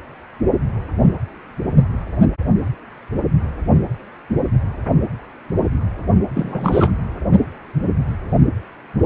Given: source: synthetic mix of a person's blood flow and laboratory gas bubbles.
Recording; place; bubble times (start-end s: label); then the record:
Doppler ultrasound of blood flow; precordium
6.34-6.91 s: bubbles
From the record:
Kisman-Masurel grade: 212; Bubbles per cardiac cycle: several, 3 to 8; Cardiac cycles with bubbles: 1 to 10%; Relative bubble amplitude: moderate (0.250 to 0.450); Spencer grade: 1 (occasional bubble signal discernible with the cardiac motion signal, with majority of cardiac periods free of bubbles); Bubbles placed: anywhere in the cardiac cycle